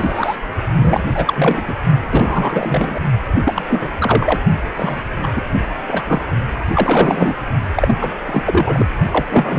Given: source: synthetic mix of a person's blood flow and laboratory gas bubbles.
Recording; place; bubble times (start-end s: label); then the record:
Doppler ultrasound of blood flow; precordium
0.00-0.37 s: bubbles
0.75-1.06 s: bubbles
1.15-1.65 s: bubbles
1.68-1.74 s: bubbles
2.10-3.00 s: bubbles
3.44-3.91 s: bubbles
3.98-4.39 s: bubbles
4.76-5.01 s: bubbles
5.22-5.28 s: bubbles
5.35-5.45 s: bubbles
5.87-6.04 s: bubbles
6.06-6.21 s: bubbles
6.75-7.43 s: bubbles
7.75-7.95 s: bubbles
8.01-8.11 s: bubbles
8.27-8.88 s: bubbles
9.11-9.25 s: bubbles
9.29-9.58 s: bubbles
From the record:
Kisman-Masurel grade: 343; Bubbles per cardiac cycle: rolling drumbeat, 9 or more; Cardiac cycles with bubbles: 100%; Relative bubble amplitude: loud (0.450 to 0.775); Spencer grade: 3 (all of the cardiac periods contain showers or single bubble signals, but not dominating or overriding the cardiac motion signals); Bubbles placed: only in the low amplitude regions of the cardiac cycle